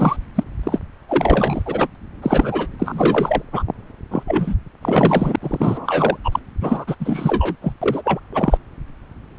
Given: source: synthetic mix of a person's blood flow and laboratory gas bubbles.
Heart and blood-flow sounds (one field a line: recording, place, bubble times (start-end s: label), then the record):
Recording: Doppler ultrasound of blood flow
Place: subclavian vein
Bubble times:
0.00-0.17 s: bubbles
0.35-0.43 s: bubbles
0.63-0.79 s: bubbles
1.08-1.62 s: bubbles
1.66-1.88 s: bubbles
1.94-1.96 s: bubbles
2.22-2.67 s: bubbles
2.79-3.42 s: bubbles
3.52-3.64 s: bubbles
4.11-4.23 s: bubbles
4.27-4.56 s: bubbles
4.82-5.36 s: bubbles
5.42-6.17 s: bubbles
6.24-6.40 s: bubbles
6.61-6.95 s: bubbles
7.00-7.56 s: bubbles
7.62-7.73 s: bubbles
7.82-8.01 s: bubbles
8.04-8.20 s: bubbles
8.33-8.57 s: bubbles
From the record:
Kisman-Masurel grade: 343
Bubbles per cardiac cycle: rolling drumbeat, 9 or more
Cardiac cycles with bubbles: 100%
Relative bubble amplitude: loud (0.450 to 0.775)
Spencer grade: 3 (all of the cardiac periods contain showers or single bubble signals, but not dominating or overriding the cardiac motion signals)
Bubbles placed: anywhere in the cardiac cycle